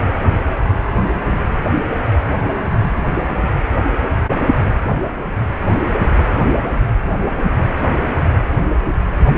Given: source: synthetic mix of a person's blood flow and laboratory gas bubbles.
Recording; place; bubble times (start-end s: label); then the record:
Doppler ultrasound of blood flow; precordium
no bubbles
From the record:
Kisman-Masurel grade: 000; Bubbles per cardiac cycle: 0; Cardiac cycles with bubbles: 0%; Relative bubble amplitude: no bubbles discernible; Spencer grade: 0 (complete lack of bubble signals)